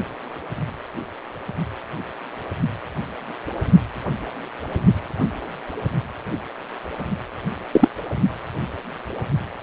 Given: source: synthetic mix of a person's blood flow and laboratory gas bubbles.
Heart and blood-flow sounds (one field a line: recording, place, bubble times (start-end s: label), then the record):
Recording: Doppler ultrasound of blood flow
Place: precordium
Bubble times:
7.72-7.89 s: bubbles
From the record:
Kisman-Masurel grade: 123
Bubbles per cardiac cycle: 1 to 2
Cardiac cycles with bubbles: 10 to 50%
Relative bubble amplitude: loud (0.450 to 0.775)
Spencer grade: 2 (many but less than half of the cardiac periods contain bubble signals, singularly or in groups)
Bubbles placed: only in the low amplitude regions of the cardiac cycle